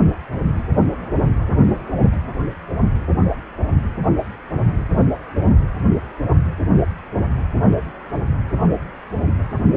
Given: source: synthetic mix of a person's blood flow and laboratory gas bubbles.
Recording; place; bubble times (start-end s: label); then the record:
Doppler ultrasound of blood flow; precordium
no bubbles
From the record:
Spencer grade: 0 (complete lack of bubble signals)